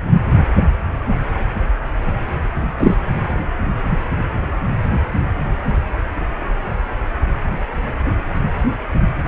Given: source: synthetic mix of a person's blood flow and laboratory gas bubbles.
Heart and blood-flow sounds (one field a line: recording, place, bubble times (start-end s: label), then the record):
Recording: Doppler ultrasound of blood flow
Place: precordium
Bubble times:
2.79-2.94 s: bubbles
From the record:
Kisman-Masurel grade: 113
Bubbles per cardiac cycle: 1 to 2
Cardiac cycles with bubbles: 1 to 10%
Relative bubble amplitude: loud (0.450 to 0.775)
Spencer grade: 1 (occasional bubble signal discernible with the cardiac motion signal, with majority of cardiac periods free of bubbles)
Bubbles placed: anywhere in the cardiac cycle